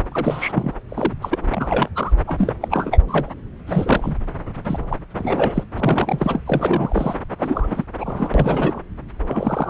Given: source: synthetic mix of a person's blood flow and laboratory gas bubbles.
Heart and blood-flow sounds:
Doppler ultrasound of blood flow; subclavian vein
0.12-0.74 s: bubbles
0.89-1.14 s: bubbles
1.21-1.39 s: bubbles
1.50-1.89 s: bubbles
1.95-2.12 s: bubbles
2.27-2.53 s: bubbles
2.61-3.01 s: bubbles
3.07-3.32 s: bubbles
3.67-4.17 s: bubbles
4.65-4.79 s: bubbles
4.88-4.97 s: bubbles
5.17-5.63 s: bubbles
5.78-6.42 s: bubbles
6.46-7.14 s: bubbles
7.40-7.84 s: bubbles
8.00-8.30 s: bubbles
8.34-8.80 s: bubbles
9.27-9.70 s: bubbles
From the record:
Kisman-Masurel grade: 342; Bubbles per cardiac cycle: rolling drumbeat, 9 or more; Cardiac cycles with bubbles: 100%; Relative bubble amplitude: moderate (0.250 to 0.450); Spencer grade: 3 (all of the cardiac periods contain showers or single bubble signals, but not dominating or overriding the cardiac motion signals); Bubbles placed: anywhere in the cardiac cycle

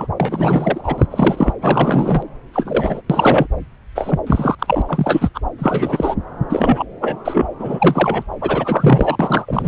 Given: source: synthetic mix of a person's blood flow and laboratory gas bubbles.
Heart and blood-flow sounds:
Doppler ultrasound of blood flow; subclavian vein
0.00-0.07 s: bubbles
0.20-0.81 s: bubbles
0.83-1.07 s: bubbles
1.10-1.53 s: bubbles
1.62-2.22 s: bubbles
2.53-3.01 s: bubbles
3.09-3.47 s: bubbles
3.95-4.19 s: bubbles
4.27-4.55 s: bubbles
4.58-4.82 s: bubbles
4.88-5.29 s: bubbles
5.34-5.41 s: bubbles
5.58-6.15 s: bubbles
6.50-6.83 s: bubbles
7.01-7.19 s: bubbles
7.25-7.48 s: bubbles
7.59-8.23 s: bubbles
8.41-9.68 s: bubbles
From the record:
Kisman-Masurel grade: 333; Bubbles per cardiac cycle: rolling drumbeat, 9 or more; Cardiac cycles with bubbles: 50 to 99%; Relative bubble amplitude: loud (0.450 to 0.775); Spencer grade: 3 (all of the cardiac periods contain showers or single bubble signals, but not dominating or overriding the cardiac motion signals); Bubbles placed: anywhere in the cardiac cycle

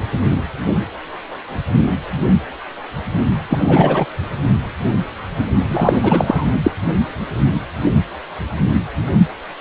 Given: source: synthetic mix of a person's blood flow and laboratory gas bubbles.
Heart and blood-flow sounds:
Doppler ultrasound of blood flow; precordium
3.49-4.05 s: bubbles
5.68-6.51 s: bubbles
6.63-6.71 s: bubbles
From the record:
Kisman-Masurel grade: 223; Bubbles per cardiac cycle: several, 3 to 8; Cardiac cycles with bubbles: 10 to 50%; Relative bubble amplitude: loud (0.450 to 0.775); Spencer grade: 2 (many but less than half of the cardiac periods contain bubble signals, singularly or in groups); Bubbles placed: only in the low amplitude regions of the cardiac cycle

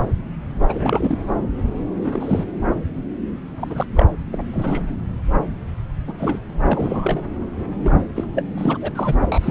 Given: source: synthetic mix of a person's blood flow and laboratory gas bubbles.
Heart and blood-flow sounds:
Doppler ultrasound of blood flow; subclavian vein
0.69-1.18 s: bubbles
2.00-2.44 s: bubbles
3.59-3.85 s: bubbles
3.95-4.06 s: bubbles
4.33-4.42 s: bubbles
4.53-4.83 s: bubbles
6.08-6.13 s: bubbles
6.18-6.38 s: bubbles
6.65-7.22 s: bubbles
7.79-8.01 s: bubbles
8.15-8.24 s: bubbles
8.35-8.43 s: bubbles
8.58-8.78 s: bubbles
8.81-8.91 s: bubbles
8.95-9.16 s: bubbles
9.32-9.50 s: bubbles
From the record:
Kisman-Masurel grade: 232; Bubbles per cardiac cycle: several, 3 to 8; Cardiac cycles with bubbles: 50 to 99%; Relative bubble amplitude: moderate (0.250 to 0.450); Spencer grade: 3 (all of the cardiac periods contain showers or single bubble signals, but not dominating or overriding the cardiac motion signals); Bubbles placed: anywhere in the cardiac cycle

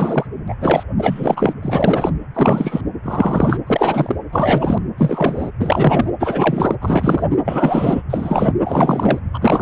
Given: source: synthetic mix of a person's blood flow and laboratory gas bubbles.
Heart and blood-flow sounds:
Doppler ultrasound of blood flow; precordium
0.00-0.27 s: bubbles
0.48-0.55 s: bubbles
0.60-0.83 s: bubbles
0.97-1.53 s: bubbles
1.62-2.11 s: bubbles
2.34-2.81 s: bubbles
3.04-3.58 s: bubbles
3.67-4.16 s: bubbles
4.32-4.78 s: bubbles
4.98-5.51 s: bubbles
5.59-6.11 s: bubbles
6.20-6.75 s: bubbles
6.82-7.22 s: bubbles
7.30-7.37 s: bubbles
7.45-8.02 s: bubbles
8.10-8.53 s: bubbles
8.65-9.19 s: bubbles
9.34-9.61 s: bubbles
From the record:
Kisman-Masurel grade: 333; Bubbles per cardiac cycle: rolling drumbeat, 9 or more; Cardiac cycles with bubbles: 50 to 99%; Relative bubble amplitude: loud (0.450 to 0.775); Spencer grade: 3 (all of the cardiac periods contain showers or single bubble signals, but not dominating or overriding the cardiac motion signals); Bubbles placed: anywhere in the cardiac cycle

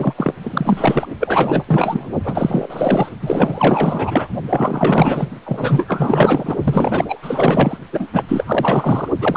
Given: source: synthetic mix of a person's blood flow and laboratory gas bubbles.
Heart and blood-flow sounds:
Doppler ultrasound of blood flow; precordium
0.00-0.14 s: bubbles
0.17-0.33 s: bubbles
0.41-1.06 s: bubbles
1.19-1.63 s: bubbles
1.67-2.10 s: bubbles
2.23-3.09 s: bubbles
3.22-4.29 s: bubbles
4.50-5.29 s: bubbles
5.45-6.55 s: bubbles
6.63-7.19 s: bubbles
7.22-7.78 s: bubbles
7.92-8.07 s: bubbles
8.12-8.23 s: bubbles
8.28-9.08 s: bubbles
9.21-9.37 s: bubbles
From the record:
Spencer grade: 4 (maximum detectable bubble signal sounding continuously throughout systole and diastole of every cardiac period, and overriding the amplitude of the normal cardiac signals); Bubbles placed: only in the low amplitude regions of the cardiac cycle

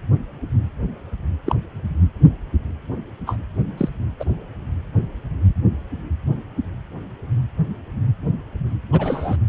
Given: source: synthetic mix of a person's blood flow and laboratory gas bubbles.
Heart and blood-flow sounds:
Doppler ultrasound of blood flow; precordium
1.46-1.55 s: bubbles
3.27-3.37 s: bubbles
3.77-3.89 s: bubbles
4.19-4.25 s: bubbles
8.92-9.37 s: bubbles
From the record:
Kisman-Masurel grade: 122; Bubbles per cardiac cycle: 1 to 2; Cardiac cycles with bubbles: 10 to 50%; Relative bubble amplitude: moderate (0.250 to 0.450); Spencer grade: 2 (many but less than half of the cardiac periods contain bubble signals, singularly or in groups); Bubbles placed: anywhere in the cardiac cycle

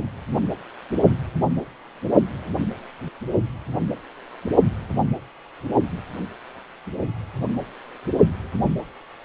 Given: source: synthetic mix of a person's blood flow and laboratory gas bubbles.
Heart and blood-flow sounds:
Doppler ultrasound of blood flow; precordium
no bubbles
From the record:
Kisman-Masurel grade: 000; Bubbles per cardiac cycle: 0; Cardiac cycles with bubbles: 0%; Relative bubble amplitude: no bubbles discernible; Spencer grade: 0 (complete lack of bubble signals)

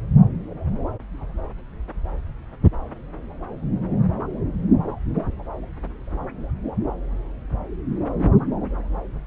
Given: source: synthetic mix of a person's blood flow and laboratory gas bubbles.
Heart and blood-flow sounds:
Doppler ultrasound of blood flow; subclavian vein
no bubbles
From the record:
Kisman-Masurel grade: 000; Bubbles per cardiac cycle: 0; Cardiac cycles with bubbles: 0%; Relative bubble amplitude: no bubbles discernible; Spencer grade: 0 (complete lack of bubble signals)

